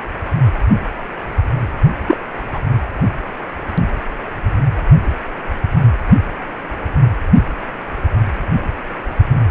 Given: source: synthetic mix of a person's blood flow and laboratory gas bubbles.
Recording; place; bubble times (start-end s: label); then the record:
Doppler ultrasound of blood flow; precordium
2.08-2.18 s: bubbles
2.52-2.60 s: bubbles
From the record:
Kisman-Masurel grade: 113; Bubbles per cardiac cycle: 1 to 2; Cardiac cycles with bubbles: 1 to 10%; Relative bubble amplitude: loud (0.450 to 0.775); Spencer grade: 1 (occasional bubble signal discernible with the cardiac motion signal, with majority of cardiac periods free of bubbles); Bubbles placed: anywhere in the cardiac cycle